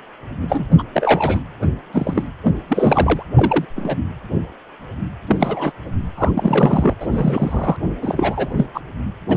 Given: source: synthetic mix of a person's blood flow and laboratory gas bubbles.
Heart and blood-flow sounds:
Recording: Doppler ultrasound of blood flow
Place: precordium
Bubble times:
0.41-0.66 s: bubbles
0.78-0.83 s: bubbles
0.93-1.40 s: bubbles
1.62-1.66 s: bubbles
1.92-2.23 s: bubbles
2.44-2.56 s: bubbles
2.68-3.23 s: bubbles
3.35-3.65 s: bubbles
3.76-3.98 s: bubbles
5.27-5.37 s: bubbles
5.40-5.72 s: bubbles
6.18-6.31 s: bubbles
6.35-6.95 s: bubbles
7.00-7.76 s: bubbles
8.01-8.54 s: bubbles
8.56-8.66 s: bubbles
8.74-8.81 s: bubbles
9.29-9.37 s: bubbles
From the record:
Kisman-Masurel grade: 232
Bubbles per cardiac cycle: several, 3 to 8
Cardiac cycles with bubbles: 50 to 99%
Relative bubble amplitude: moderate (0.250 to 0.450)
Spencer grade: 3 (all of the cardiac periods contain showers or single bubble signals, but not dominating or overriding the cardiac motion signals)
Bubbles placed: anywhere in the cardiac cycle

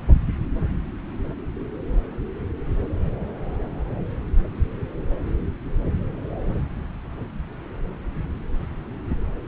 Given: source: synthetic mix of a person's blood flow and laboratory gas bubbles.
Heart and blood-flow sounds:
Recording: Doppler ultrasound of blood flow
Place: subclavian vein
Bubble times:
no bubbles
From the record:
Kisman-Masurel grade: 000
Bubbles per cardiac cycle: 0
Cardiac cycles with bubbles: 0%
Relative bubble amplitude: no bubbles discernible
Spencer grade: 0 (complete lack of bubble signals)

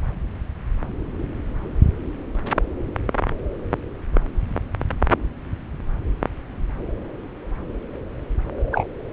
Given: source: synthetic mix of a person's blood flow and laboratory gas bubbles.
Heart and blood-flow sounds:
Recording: Doppler ultrasound of blood flow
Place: subclavian vein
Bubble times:
8.71-8.87 s: bubbles
From the record:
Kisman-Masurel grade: 123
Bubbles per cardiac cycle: 1 to 2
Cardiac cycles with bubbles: 10 to 50%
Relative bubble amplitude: loud (0.450 to 0.775)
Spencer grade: 2 (many but less than half of the cardiac periods contain bubble signals, singularly or in groups)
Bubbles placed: anywhere in the cardiac cycle

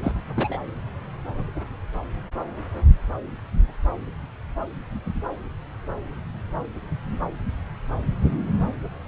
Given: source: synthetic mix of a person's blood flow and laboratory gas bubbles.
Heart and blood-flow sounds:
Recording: Doppler ultrasound of blood flow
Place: subclavian vein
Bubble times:
0.02-0.12 s: bubbles
0.36-0.58 s: bubbles
From the record:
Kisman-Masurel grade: 112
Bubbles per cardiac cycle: 1 to 2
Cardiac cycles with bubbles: 1 to 10%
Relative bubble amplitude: moderate (0.250 to 0.450)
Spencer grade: 1 (occasional bubble signal discernible with the cardiac motion signal, with majority of cardiac periods free of bubbles)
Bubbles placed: anywhere in the cardiac cycle

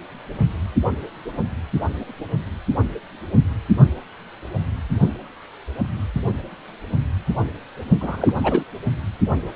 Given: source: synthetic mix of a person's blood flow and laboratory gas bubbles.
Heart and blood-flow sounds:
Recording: Doppler ultrasound of blood flow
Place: precordium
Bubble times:
8.00-8.33 s: bubbles
8.44-8.63 s: bubbles
From the record:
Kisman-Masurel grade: 212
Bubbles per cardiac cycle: several, 3 to 8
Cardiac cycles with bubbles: 1 to 10%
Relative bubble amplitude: moderate (0.250 to 0.450)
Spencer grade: 1 (occasional bubble signal discernible with the cardiac motion signal, with majority of cardiac periods free of bubbles)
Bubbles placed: only in the low amplitude regions of the cardiac cycle

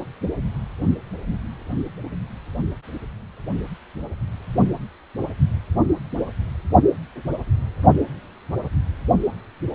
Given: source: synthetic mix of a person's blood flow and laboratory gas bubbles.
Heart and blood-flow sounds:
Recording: Doppler ultrasound of blood flow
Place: precordium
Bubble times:
no bubbles
From the record:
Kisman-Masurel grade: 000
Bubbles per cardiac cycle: 0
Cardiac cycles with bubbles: 0%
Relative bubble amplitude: no bubbles discernible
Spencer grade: 0 (complete lack of bubble signals)

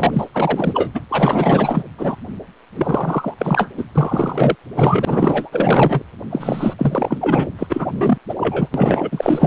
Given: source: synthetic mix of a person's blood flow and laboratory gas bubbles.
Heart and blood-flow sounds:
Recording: Doppler ultrasound of blood flow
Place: precordium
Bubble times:
0.00-0.26 s: bubbles
0.33-0.91 s: bubbles
0.94-1.01 s: bubbles
1.09-1.82 s: bubbles
1.98-2.16 s: bubbles
2.75-3.34 s: bubbles
3.38-3.68 s: bubbles
3.77-3.85 s: bubbles
3.95-4.55 s: bubbles
4.75-6.03 s: bubbles
6.29-6.75 s: bubbles
6.78-7.49 s: bubbles
7.58-7.67 s: bubbles
7.69-8.19 s: bubbles
8.29-8.35 s: bubbles
8.39-8.68 s: bubbles
8.74-9.47 s: bubbles
From the record:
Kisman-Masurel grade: 444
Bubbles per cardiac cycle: continuous sound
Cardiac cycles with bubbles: 100%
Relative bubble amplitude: maximal (0.775 to 0.999)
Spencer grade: 4 (maximum detectable bubble signal sounding continuously throughout systole and diastole of every cardiac period, and overriding the amplitude of the normal cardiac signals)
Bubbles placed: anywhere in the cardiac cycle

